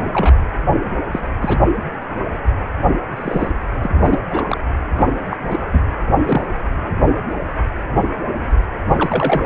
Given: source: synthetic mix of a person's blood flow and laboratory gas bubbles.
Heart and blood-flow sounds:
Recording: Doppler ultrasound of blood flow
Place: precordium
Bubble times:
0.00-0.34 s: bubbles
1.12-1.20 s: bubbles
1.42-1.58 s: bubbles
3.16-3.51 s: bubbles
3.81-3.90 s: bubbles
3.94-4.20 s: bubbles
4.31-4.58 s: bubbles
4.93-5.11 s: bubbles
5.30-5.37 s: bubbles
5.46-5.64 s: bubbles
5.72-5.81 s: bubbles
6.03-6.13 s: bubbles
6.25-6.47 s: bubbles
8.88-9.46 s: bubbles
From the record:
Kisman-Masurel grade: 232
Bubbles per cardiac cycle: several, 3 to 8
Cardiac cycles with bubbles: 50 to 99%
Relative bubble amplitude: moderate (0.250 to 0.450)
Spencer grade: 3 (all of the cardiac periods contain showers or single bubble signals, but not dominating or overriding the cardiac motion signals)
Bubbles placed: anywhere in the cardiac cycle

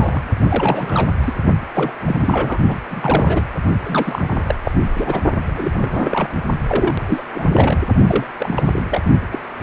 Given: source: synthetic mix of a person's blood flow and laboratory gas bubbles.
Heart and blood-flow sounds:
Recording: Doppler ultrasound of blood flow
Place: precordium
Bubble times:
0.00-0.22 s: bubbles
0.44-1.10 s: bubbles
1.20-1.33 s: bubbles
1.74-1.93 s: bubbles
2.04-2.59 s: bubbles
2.68-2.78 s: bubbles
2.90-3.52 s: bubbles
3.83-4.55 s: bubbles
4.64-4.71 s: bubbles
4.98-5.20 s: bubbles
5.45-6.29 s: bubbles
6.69-7.23 s: bubbles
7.33-7.49 s: bubbles
7.52-7.79 s: bubbles
8.06-8.27 s: bubbles
8.39-8.83 s: bubbles
8.91-9.02 s: bubbles
9.31-9.39 s: bubbles
9.58-9.63 s: bubbles
From the record:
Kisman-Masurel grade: 332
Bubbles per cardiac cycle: rolling drumbeat, 9 or more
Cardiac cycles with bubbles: 50 to 99%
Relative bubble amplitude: moderate (0.250 to 0.450)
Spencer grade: 3 (all of the cardiac periods contain showers or single bubble signals, but not dominating or overriding the cardiac motion signals)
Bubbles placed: only in the low amplitude regions of the cardiac cycle

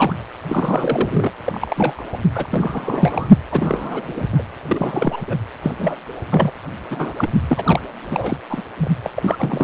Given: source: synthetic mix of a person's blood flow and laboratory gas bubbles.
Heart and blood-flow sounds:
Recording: Doppler ultrasound of blood flow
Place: precordium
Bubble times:
0.00-0.15 s: bubbles
0.47-1.31 s: bubbles
1.46-2.17 s: bubbles
2.34-2.46 s: bubbles
2.51-3.30 s: bubbles
3.51-4.43 s: bubbles
4.67-5.21 s: bubbles
5.28-5.37 s: bubbles
5.62-5.75 s: bubbles
5.79-5.96 s: bubbles
6.31-6.51 s: bubbles
6.91-7.14 s: bubbles
7.17-7.29 s: bubbles
7.48-7.82 s: bubbles
8.08-8.37 s: bubbles
8.49-8.63 s: bubbles
8.77-8.91 s: bubbles
9.04-9.10 s: bubbles
9.16-9.63 s: bubbles
From the record:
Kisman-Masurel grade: 342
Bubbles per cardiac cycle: rolling drumbeat, 9 or more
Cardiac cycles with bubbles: 100%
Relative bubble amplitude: moderate (0.250 to 0.450)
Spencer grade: 3 (all of the cardiac periods contain showers or single bubble signals, but not dominating or overriding the cardiac motion signals)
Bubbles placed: anywhere in the cardiac cycle

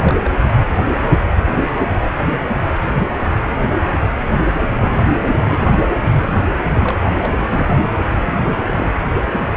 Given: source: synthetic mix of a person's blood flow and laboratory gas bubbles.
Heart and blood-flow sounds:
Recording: Doppler ultrasound of blood flow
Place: precordium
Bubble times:
0.00-0.29 s: bubbles
0.32-0.37 s: bubbles
4.62-5.04 s: bubbles
5.30-5.39 s: bubbles
5.42-5.83 s: bubbles
6.18-6.40 s: bubbles
6.75-6.96 s: bubbles
7.17-7.78 s: bubbles
8.27-8.93 s: bubbles
From the record:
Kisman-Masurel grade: 221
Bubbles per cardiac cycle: several, 3 to 8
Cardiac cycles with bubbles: 10 to 50%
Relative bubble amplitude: barely perceptible (0.100 to 0.250)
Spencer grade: 2 (many but less than half of the cardiac periods contain bubble signals, singularly or in groups)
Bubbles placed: anywhere in the cardiac cycle

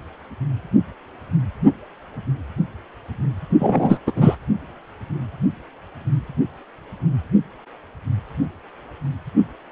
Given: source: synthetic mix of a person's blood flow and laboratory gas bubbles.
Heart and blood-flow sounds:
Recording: Doppler ultrasound of blood flow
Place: precordium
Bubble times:
3.58-3.98 s: bubbles
4.07-4.12 s: bubbles
4.16-4.36 s: bubbles
From the record:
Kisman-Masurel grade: 213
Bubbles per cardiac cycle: several, 3 to 8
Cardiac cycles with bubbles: 1 to 10%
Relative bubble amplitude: loud (0.450 to 0.775)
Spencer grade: 1 (occasional bubble signal discernible with the cardiac motion signal, with majority of cardiac periods free of bubbles)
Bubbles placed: only in the low amplitude regions of the cardiac cycle

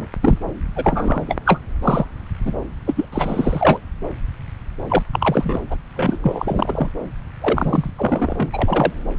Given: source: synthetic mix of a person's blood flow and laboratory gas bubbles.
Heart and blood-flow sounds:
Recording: Doppler ultrasound of blood flow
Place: subclavian vein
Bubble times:
0.00-0.07 s: bubbles
0.22-0.39 s: bubbles
0.75-1.35 s: bubbles
1.46-1.60 s: bubbles
1.82-2.05 s: bubbles
2.45-2.54 s: bubbles
2.86-3.05 s: bubbles
3.12-3.79 s: bubbles
4.90-5.03 s: bubbles
5.12-5.61 s: bubbles
5.70-5.76 s: bubbles
5.96-6.17 s: bubbles
6.23-6.88 s: bubbles
7.41-7.90 s: bubbles
7.96-8.92 s: bubbles
From the record:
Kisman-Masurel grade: 332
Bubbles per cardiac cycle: rolling drumbeat, 9 or more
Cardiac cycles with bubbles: 50 to 99%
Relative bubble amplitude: moderate (0.250 to 0.450)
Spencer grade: 3 (all of the cardiac periods contain showers or single bubble signals, but not dominating or overriding the cardiac motion signals)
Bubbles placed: anywhere in the cardiac cycle

